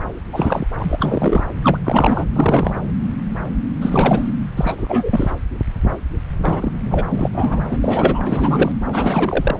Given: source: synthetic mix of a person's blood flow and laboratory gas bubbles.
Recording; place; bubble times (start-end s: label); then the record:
Doppler ultrasound of blood flow; subclavian vein
0.00-0.02 s: bubbles
0.33-0.65 s: bubbles
0.79-1.47 s: bubbles
1.62-1.78 s: bubbles
1.83-2.24 s: bubbles
2.30-2.80 s: bubbles
3.81-4.31 s: bubbles
4.56-5.30 s: bubbles
6.38-6.72 s: bubbles
6.86-7.04 s: bubbles
7.09-7.29 s: bubbles
7.33-7.63 s: bubbles
7.71-7.78 s: bubbles
7.82-8.73 s: bubbles
8.93-9.57 s: bubbles
From the record:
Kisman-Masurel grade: 333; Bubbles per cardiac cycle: rolling drumbeat, 9 or more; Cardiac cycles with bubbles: 50 to 99%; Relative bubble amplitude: loud (0.450 to 0.775); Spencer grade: 3 (all of the cardiac periods contain showers or single bubble signals, but not dominating or overriding the cardiac motion signals); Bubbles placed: anywhere in the cardiac cycle